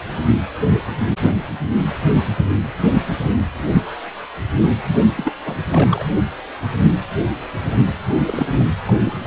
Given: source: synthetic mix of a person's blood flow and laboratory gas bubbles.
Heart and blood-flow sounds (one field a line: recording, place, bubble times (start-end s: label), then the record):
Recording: Doppler ultrasound of blood flow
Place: precordium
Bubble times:
5.16-5.33 s: bubbles
5.45-5.58 s: bubbles
5.71-6.04 s: bubbles
8.27-8.64 s: bubbles
8.85-8.93 s: bubbles
9.04-9.13 s: bubbles
From the record:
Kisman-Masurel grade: 222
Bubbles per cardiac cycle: several, 3 to 8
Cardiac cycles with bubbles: 10 to 50%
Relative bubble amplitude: moderate (0.250 to 0.450)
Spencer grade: 2 (many but less than half of the cardiac periods contain bubble signals, singularly or in groups)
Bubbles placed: only in the low amplitude regions of the cardiac cycle